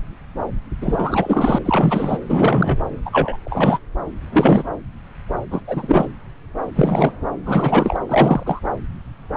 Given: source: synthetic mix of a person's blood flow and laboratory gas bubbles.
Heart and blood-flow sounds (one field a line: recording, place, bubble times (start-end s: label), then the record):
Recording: Doppler ultrasound of blood flow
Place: subclavian vein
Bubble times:
0.81-1.58 s: bubbles
1.65-2.17 s: bubbles
2.29-2.79 s: bubbles
3.06-3.37 s: bubbles
3.45-3.79 s: bubbles
4.32-4.64 s: bubbles
5.51-5.62 s: bubbles
5.67-6.05 s: bubbles
6.75-7.12 s: bubbles
7.46-7.99 s: bubbles
8.09-8.43 s: bubbles
8.46-8.60 s: bubbles
From the record:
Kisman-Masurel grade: 333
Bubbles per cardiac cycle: rolling drumbeat, 9 or more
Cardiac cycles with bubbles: 50 to 99%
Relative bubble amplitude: loud (0.450 to 0.775)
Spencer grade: 3 (all of the cardiac periods contain showers or single bubble signals, but not dominating or overriding the cardiac motion signals)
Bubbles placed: anywhere in the cardiac cycle